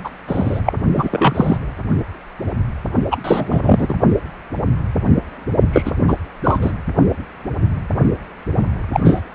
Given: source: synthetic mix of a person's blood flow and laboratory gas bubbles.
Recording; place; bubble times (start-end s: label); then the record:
Doppler ultrasound of blood flow; precordium
0.04-0.10 s: bubbles
0.28-0.60 s: bubbles
0.65-0.73 s: bubbles
0.96-1.57 s: bubbles
3.10-3.18 s: bubbles
3.24-3.94 s: bubbles
5.73-5.83 s: bubbles
5.85-5.92 s: bubbles
6.08-6.15 s: bubbles
6.43-6.58 s: bubbles
6.61-6.72 s: bubbles
8.92-9.00 s: bubbles
9.04-9.21 s: bubbles
From the record:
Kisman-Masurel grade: 223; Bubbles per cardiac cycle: several, 3 to 8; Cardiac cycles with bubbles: 10 to 50%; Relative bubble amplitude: loud (0.450 to 0.775); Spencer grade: 2 (many but less than half of the cardiac periods contain bubble signals, singularly or in groups); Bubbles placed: only in the low amplitude regions of the cardiac cycle